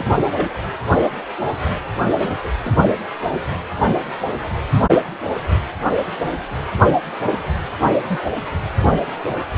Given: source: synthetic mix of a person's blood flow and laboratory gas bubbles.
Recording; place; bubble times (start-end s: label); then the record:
Doppler ultrasound of blood flow; precordium
0.00-0.06 s: bubbles
0.23-0.61 s: bubbles
2.04-2.49 s: bubbles
2.65-2.92 s: bubbles
7.26-7.42 s: bubbles
8.06-8.20 s: bubbles
From the record:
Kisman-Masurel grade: 121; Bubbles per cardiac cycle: 1 to 2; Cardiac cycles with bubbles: 10 to 50%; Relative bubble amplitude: barely perceptible (0.100 to 0.250); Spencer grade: 2 (many but less than half of the cardiac periods contain bubble signals, singularly or in groups); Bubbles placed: anywhere in the cardiac cycle